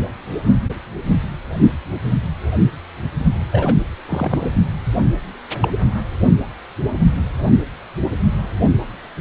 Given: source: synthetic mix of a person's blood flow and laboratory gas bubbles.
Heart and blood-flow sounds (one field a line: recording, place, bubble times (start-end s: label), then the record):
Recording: Doppler ultrasound of blood flow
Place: precordium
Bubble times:
3.52-3.76 s: bubbles
4.08-4.51 s: bubbles
5.60-5.68 s: bubbles
From the record:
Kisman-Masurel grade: 122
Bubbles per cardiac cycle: 1 to 2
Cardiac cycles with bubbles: 10 to 50%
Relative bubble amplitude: moderate (0.250 to 0.450)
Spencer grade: 2 (many but less than half of the cardiac periods contain bubble signals, singularly or in groups)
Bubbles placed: only in the low amplitude regions of the cardiac cycle